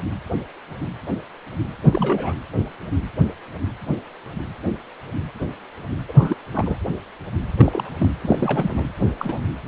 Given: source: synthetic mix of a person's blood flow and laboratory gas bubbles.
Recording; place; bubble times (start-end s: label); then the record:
Doppler ultrasound of blood flow; precordium
1.84-2.33 s: bubbles
6.08-6.13 s: bubbles
6.17-6.35 s: bubbles
6.52-6.77 s: bubbles
7.59-7.89 s: bubbles
7.98-8.10 s: bubbles
8.21-8.85 s: bubbles
9.19-9.39 s: bubbles
From the record:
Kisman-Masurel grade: 222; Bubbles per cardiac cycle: several, 3 to 8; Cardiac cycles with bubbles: 10 to 50%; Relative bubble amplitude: moderate (0.250 to 0.450); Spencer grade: 2 (many but less than half of the cardiac periods contain bubble signals, singularly or in groups); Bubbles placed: anywhere in the cardiac cycle